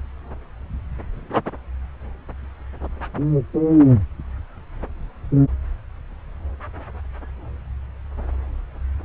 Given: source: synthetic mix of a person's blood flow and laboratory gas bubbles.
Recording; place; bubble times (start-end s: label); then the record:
Doppler ultrasound of blood flow; subclavian vein
no bubbles
From the record:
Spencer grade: 0 (complete lack of bubble signals)